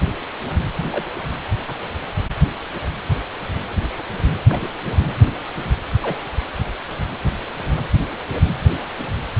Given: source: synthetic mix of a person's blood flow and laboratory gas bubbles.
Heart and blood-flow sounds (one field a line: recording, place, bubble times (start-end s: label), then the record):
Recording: Doppler ultrasound of blood flow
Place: precordium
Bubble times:
0.91-1.05 s: bubbles
1.67-1.74 s: bubbles
4.48-4.68 s: bubbles
6.01-6.17 s: bubbles
From the record:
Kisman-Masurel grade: 121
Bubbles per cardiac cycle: 1 to 2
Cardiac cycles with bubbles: 10 to 50%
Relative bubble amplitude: barely perceptible (0.100 to 0.250)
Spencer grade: 2 (many but less than half of the cardiac periods contain bubble signals, singularly or in groups)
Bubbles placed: anywhere in the cardiac cycle